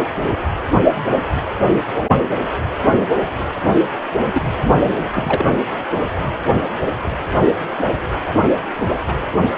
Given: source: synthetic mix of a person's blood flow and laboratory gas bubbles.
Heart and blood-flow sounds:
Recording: Doppler ultrasound of blood flow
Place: precordium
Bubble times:
4.33-4.42 s: bubbles
4.60-4.75 s: bubbles
4.83-4.91 s: bubbles
5.05-5.45 s: bubbles
From the record:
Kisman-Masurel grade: 222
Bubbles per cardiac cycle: several, 3 to 8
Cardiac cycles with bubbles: 10 to 50%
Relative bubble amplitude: moderate (0.250 to 0.450)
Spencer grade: 2 (many but less than half of the cardiac periods contain bubble signals, singularly or in groups)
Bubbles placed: anywhere in the cardiac cycle

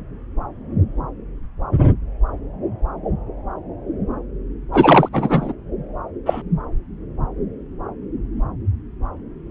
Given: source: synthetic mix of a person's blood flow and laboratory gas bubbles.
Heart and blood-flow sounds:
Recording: Doppler ultrasound of blood flow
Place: subclavian vein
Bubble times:
4.72-5.09 s: bubbles
5.12-5.53 s: bubbles
6.25-6.42 s: bubbles
From the record:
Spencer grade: 1 (occasional bubble signal discernible with the cardiac motion signal, with majority of cardiac periods free of bubbles)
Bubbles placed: anywhere in the cardiac cycle

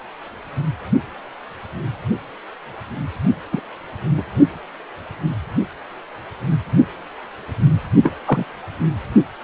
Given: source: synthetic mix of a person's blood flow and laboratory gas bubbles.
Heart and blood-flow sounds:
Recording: Doppler ultrasound of blood flow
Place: precordium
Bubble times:
3.52-3.60 s: bubbles
4.17-4.23 s: bubbles
8.04-8.13 s: bubbles
8.27-8.45 s: bubbles
From the record:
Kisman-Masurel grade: 123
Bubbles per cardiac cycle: 1 to 2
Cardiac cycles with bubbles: 10 to 50%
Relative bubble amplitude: loud (0.450 to 0.775)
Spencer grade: 2 (many but less than half of the cardiac periods contain bubble signals, singularly or in groups)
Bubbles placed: anywhere in the cardiac cycle

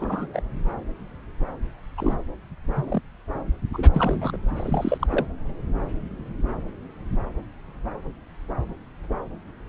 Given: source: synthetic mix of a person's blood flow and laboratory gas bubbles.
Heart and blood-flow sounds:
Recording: Doppler ultrasound of blood flow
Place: subclavian vein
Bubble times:
0.00-0.26 s: bubbles
0.34-0.42 s: bubbles
1.97-2.15 s: bubbles
2.74-3.00 s: bubbles
3.73-3.89 s: bubbles
3.93-4.37 s: bubbles
4.56-5.06 s: bubbles
5.09-5.26 s: bubbles
From the record:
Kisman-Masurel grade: 221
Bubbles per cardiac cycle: several, 3 to 8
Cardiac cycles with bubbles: 10 to 50%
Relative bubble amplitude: barely perceptible (0.100 to 0.250)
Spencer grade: 2 (many but less than half of the cardiac periods contain bubble signals, singularly or in groups)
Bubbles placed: anywhere in the cardiac cycle

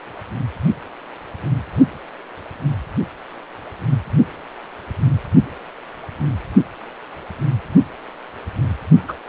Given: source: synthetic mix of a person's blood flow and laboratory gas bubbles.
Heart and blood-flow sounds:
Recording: Doppler ultrasound of blood flow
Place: precordium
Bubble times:
9.08-9.14 s: bubbles
From the record:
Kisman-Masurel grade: 213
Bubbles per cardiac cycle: several, 3 to 8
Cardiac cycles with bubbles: 1 to 10%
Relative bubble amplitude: loud (0.450 to 0.775)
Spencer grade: 1 (occasional bubble signal discernible with the cardiac motion signal, with majority of cardiac periods free of bubbles)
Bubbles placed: only in the low amplitude regions of the cardiac cycle

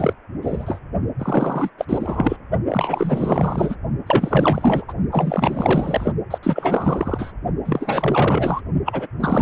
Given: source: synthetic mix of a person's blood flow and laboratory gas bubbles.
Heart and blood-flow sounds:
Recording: Doppler ultrasound of blood flow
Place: precordium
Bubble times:
0.00-0.14 s: bubbles
0.42-0.80 s: bubbles
1.18-1.70 s: bubbles
1.78-1.85 s: bubbles
1.89-2.37 s: bubbles
2.69-3.76 s: bubbles
4.07-4.84 s: bubbles
4.88-4.93 s: bubbles
5.12-6.12 s: bubbles
6.30-6.38 s: bubbles
6.43-7.32 s: bubbles
7.65-8.62 s: bubbles
8.85-9.07 s: bubbles
9.20-9.42 s: bubbles
From the record:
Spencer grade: 4 (maximum detectable bubble signal sounding continuously throughout systole and diastole of every cardiac period, and overriding the amplitude of the normal cardiac signals)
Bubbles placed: only in the low amplitude regions of the cardiac cycle

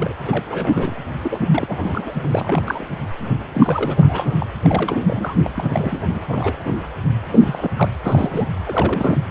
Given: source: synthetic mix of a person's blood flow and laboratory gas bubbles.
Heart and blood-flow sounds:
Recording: Doppler ultrasound of blood flow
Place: precordium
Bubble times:
0.00-0.14 s: bubbles
0.24-0.96 s: bubbles
1.23-1.38 s: bubbles
1.52-2.17 s: bubbles
2.23-2.86 s: bubbles
3.53-4.37 s: bubbles
4.40-4.46 s: bubbles
4.62-5.35 s: bubbles
5.43-5.50 s: bubbles
5.56-6.03 s: bubbles
6.28-6.62 s: bubbles
6.66-6.78 s: bubbles
7.32-7.70 s: bubbles
7.76-7.89 s: bubbles
8.06-8.47 s: bubbles
8.64-9.20 s: bubbles
From the record:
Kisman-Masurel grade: 342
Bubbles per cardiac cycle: rolling drumbeat, 9 or more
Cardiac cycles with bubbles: 100%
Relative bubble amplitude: moderate (0.250 to 0.450)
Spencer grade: 3 (all of the cardiac periods contain showers or single bubble signals, but not dominating or overriding the cardiac motion signals)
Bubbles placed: anywhere in the cardiac cycle

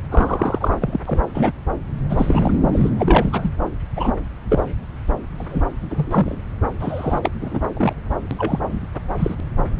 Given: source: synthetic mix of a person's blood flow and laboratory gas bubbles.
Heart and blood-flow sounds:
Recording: Doppler ultrasound of blood flow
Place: subclavian vein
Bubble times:
0.11-0.75 s: bubbles
0.80-1.00 s: bubbles
1.05-1.20 s: bubbles
1.34-1.52 s: bubbles
2.10-2.51 s: bubbles
2.72-2.91 s: bubbles
2.98-3.50 s: bubbles
3.95-4.12 s: bubbles
4.50-4.64 s: bubbles
5.38-5.63 s: bubbles
5.90-6.36 s: bubbles
6.79-7.31 s: bubbles
7.41-7.60 s: bubbles
7.76-7.93 s: bubbles
8.31-8.35 s: bubbles
8.38-8.59 s: bubbles
8.69-8.79 s: bubbles
9.18-9.40 s: bubbles
From the record:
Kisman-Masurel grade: 243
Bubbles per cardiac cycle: several, 3 to 8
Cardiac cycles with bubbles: 100%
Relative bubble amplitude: loud (0.450 to 0.775)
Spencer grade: 3 (all of the cardiac periods contain showers or single bubble signals, but not dominating or overriding the cardiac motion signals)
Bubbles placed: anywhere in the cardiac cycle

